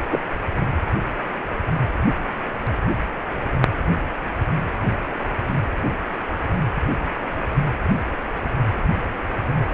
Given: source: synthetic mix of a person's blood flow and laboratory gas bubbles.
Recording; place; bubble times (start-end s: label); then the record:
Doppler ultrasound of blood flow; precordium
0.08-0.20 s: bubbles
From the record:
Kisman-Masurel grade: 113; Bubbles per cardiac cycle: 1 to 2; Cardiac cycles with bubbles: 1 to 10%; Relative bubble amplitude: loud (0.450 to 0.775); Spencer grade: 1 (occasional bubble signal discernible with the cardiac motion signal, with majority of cardiac periods free of bubbles); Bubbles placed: anywhere in the cardiac cycle